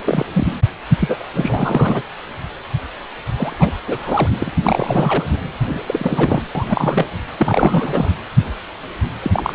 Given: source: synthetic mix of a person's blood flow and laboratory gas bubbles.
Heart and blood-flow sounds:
Doppler ultrasound of blood flow; precordium
0.04-0.26 s: bubbles
0.32-0.54 s: bubbles
0.99-1.25 s: bubbles
1.33-2.02 s: bubbles
3.37-3.56 s: bubbles
3.59-3.72 s: bubbles
3.86-4.29 s: bubbles
4.38-4.51 s: bubbles
4.63-5.24 s: bubbles
5.65-5.82 s: bubbles
5.86-6.43 s: bubbles
6.55-7.06 s: bubbles
7.38-8.11 s: bubbles
9.22-9.55 s: bubbles
From the record:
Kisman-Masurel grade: 332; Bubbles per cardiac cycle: rolling drumbeat, 9 or more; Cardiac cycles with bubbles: 50 to 99%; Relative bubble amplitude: moderate (0.250 to 0.450); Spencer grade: 3 (all of the cardiac periods contain showers or single bubble signals, but not dominating or overriding the cardiac motion signals); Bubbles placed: anywhere in the cardiac cycle

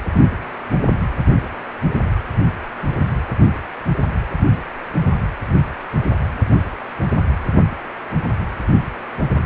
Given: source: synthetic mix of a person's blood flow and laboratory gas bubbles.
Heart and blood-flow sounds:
Doppler ultrasound of blood flow; precordium
no bubbles
From the record:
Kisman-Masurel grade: 000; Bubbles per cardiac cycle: 0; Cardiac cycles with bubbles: 0%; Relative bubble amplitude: no bubbles discernible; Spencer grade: 0 (complete lack of bubble signals)

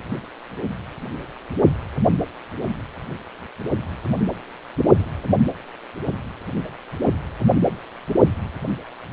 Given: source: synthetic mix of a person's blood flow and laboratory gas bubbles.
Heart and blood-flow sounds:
Doppler ultrasound of blood flow; precordium
no bubbles
From the record:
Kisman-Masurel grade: 000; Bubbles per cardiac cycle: 0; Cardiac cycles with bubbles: 0%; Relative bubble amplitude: no bubbles discernible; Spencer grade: 0 (complete lack of bubble signals)

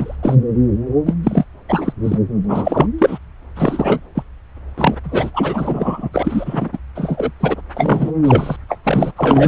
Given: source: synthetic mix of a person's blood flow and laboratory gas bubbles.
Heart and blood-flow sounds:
Doppler ultrasound of blood flow; subclavian vein
0.00-0.15 s: bubbles
0.22-0.35 s: bubbles
1.06-1.14 s: bubbles
1.24-1.45 s: bubbles
1.69-1.93 s: bubbles
2.03-2.19 s: bubbles
2.48-2.87 s: bubbles
2.98-3.19 s: bubbles
3.56-4.00 s: bubbles
4.14-4.23 s: bubbles
4.77-4.94 s: bubbles
5.04-5.30 s: bubbles
5.33-6.09 s: bubbles
6.13-6.77 s: bubbles
6.95-7.30 s: bubbles
7.39-7.55 s: bubbles
7.75-8.12 s: bubbles
8.25-8.57 s: bubbles
8.69-8.77 s: bubbles
8.85-9.12 s: bubbles
9.16-9.48 s: bubbles
From the record:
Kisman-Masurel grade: 343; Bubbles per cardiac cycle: rolling drumbeat, 9 or more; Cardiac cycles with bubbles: 100%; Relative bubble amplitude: loud (0.450 to 0.775); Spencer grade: 3 (all of the cardiac periods contain showers or single bubble signals, but not dominating or overriding the cardiac motion signals); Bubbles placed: anywhere in the cardiac cycle

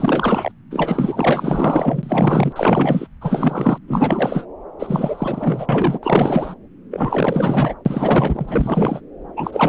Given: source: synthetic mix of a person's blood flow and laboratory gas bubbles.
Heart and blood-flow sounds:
Doppler ultrasound of blood flow; subclavian vein
0.00-0.51 s: bubbles
0.71-2.52 s: bubbles
2.56-3.07 s: bubbles
3.21-3.78 s: bubbles
3.87-4.45 s: bubbles
4.79-5.98 s: bubbles
6.02-6.54 s: bubbles
6.90-7.74 s: bubbles
7.85-9.01 s: bubbles
9.36-9.69 s: bubbles
From the record:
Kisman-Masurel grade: 444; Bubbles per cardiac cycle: continuous sound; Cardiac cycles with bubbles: 100%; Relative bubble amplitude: maximal (0.775 to 0.999); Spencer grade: 4 (maximum detectable bubble signal sounding continuously throughout systole and diastole of every cardiac period, and overriding the amplitude of the normal cardiac signals); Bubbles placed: anywhere in the cardiac cycle

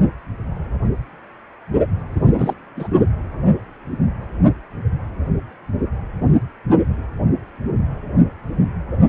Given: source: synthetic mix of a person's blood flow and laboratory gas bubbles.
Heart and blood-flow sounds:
Doppler ultrasound of blood flow; precordium
2.09-2.54 s: bubbles
2.76-2.88 s: bubbles
2.96-3.08 s: bubbles
From the record:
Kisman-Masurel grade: 212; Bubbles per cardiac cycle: several, 3 to 8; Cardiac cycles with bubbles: 1 to 10%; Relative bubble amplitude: moderate (0.250 to 0.450); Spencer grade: 1 (occasional bubble signal discernible with the cardiac motion signal, with majority of cardiac periods free of bubbles); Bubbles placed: anywhere in the cardiac cycle

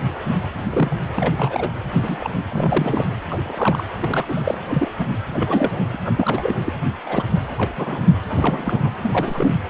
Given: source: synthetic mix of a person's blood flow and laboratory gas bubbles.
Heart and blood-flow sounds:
Doppler ultrasound of blood flow; precordium
0.58-0.96 s: bubbles
1.16-1.32 s: bubbles
1.37-1.71 s: bubbles
2.02-2.31 s: bubbles
2.49-3.04 s: bubbles
3.30-3.84 s: bubbles
3.99-4.58 s: bubbles
4.68-4.90 s: bubbles
4.98-5.17 s: bubbles
5.33-5.71 s: bubbles
5.77-5.83 s: bubbles
5.92-5.98 s: bubbles
6.04-6.54 s: bubbles
6.65-6.73 s: bubbles
7.06-7.29 s: bubbles
7.58-8.07 s: bubbles
8.29-8.90 s: bubbles
9.03-9.57 s: bubbles
From the record:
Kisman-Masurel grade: 242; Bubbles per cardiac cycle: several, 3 to 8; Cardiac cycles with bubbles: 100%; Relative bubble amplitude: moderate (0.250 to 0.450); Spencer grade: 3 (all of the cardiac periods contain showers or single bubble signals, but not dominating or overriding the cardiac motion signals); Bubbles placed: anywhere in the cardiac cycle

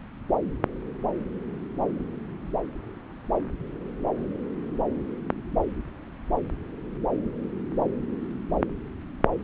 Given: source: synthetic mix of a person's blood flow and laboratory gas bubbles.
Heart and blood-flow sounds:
Doppler ultrasound of blood flow; subclavian vein
no bubbles
From the record:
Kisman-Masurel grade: 000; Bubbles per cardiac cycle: 0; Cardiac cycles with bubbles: 0%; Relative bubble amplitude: no bubbles discernible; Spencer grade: 0 (complete lack of bubble signals)

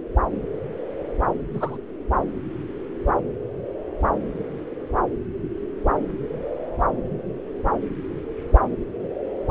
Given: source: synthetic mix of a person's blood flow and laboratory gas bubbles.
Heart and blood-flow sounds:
Doppler ultrasound of blood flow; subclavian vein
1.53-1.78 s: bubbles
From the record:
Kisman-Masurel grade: 123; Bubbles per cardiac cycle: 1 to 2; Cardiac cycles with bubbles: 10 to 50%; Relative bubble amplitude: loud (0.450 to 0.775); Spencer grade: 2 (many but less than half of the cardiac periods contain bubble signals, singularly or in groups); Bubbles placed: anywhere in the cardiac cycle

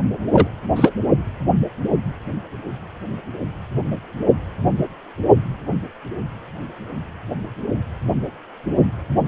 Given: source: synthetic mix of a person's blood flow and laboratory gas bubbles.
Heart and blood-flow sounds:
Doppler ultrasound of blood flow; precordium
0.33-0.48 s: bubbles
0.76-0.91 s: bubbles
From the record:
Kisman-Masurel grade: 213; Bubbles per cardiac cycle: several, 3 to 8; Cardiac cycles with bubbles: 1 to 10%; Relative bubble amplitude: loud (0.450 to 0.775); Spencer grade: 1 (occasional bubble signal discernible with the cardiac motion signal, with majority of cardiac periods free of bubbles); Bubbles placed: only in the low amplitude regions of the cardiac cycle

